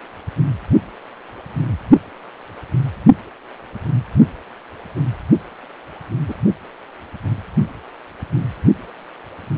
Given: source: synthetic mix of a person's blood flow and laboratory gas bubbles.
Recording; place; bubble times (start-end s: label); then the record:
Doppler ultrasound of blood flow; precordium
6.28-6.35 s: bubbles
From the record:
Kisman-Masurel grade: 122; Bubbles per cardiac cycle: 1 to 2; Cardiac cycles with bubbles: 10 to 50%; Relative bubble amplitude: moderate (0.250 to 0.450); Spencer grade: 2 (many but less than half of the cardiac periods contain bubble signals, singularly or in groups); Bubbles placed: only in the low amplitude regions of the cardiac cycle